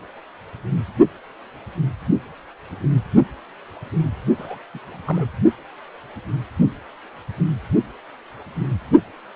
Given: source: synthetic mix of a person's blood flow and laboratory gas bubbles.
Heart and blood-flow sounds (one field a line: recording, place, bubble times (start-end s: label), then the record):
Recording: Doppler ultrasound of blood flow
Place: precordium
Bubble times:
4.38-4.58 s: bubbles
4.74-4.79 s: bubbles
4.90-5.27 s: bubbles
From the record:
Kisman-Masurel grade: 211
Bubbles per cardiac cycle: several, 3 to 8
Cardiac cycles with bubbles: 1 to 10%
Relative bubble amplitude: barely perceptible (0.100 to 0.250)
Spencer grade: 1 (occasional bubble signal discernible with the cardiac motion signal, with majority of cardiac periods free of bubbles)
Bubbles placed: only in the low amplitude regions of the cardiac cycle